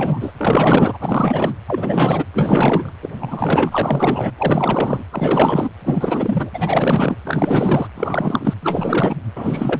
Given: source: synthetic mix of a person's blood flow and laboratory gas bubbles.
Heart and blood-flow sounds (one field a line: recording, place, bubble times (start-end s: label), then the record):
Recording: Doppler ultrasound of blood flow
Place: precordium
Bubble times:
0.00-0.33 s: bubbles
0.37-0.98 s: bubbles
1.00-1.53 s: bubbles
1.67-2.26 s: bubbles
2.33-2.93 s: bubbles
3.01-4.32 s: bubbles
4.38-5.04 s: bubbles
5.11-5.71 s: bubbles
5.84-6.50 s: bubbles
6.54-7.16 s: bubbles
7.25-7.87 s: bubbles
7.95-8.54 s: bubbles
8.61-9.16 s: bubbles
9.35-9.79 s: bubbles
From the record:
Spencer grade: 4 (maximum detectable bubble signal sounding continuously throughout systole and diastole of every cardiac period, and overriding the amplitude of the normal cardiac signals)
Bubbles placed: anywhere in the cardiac cycle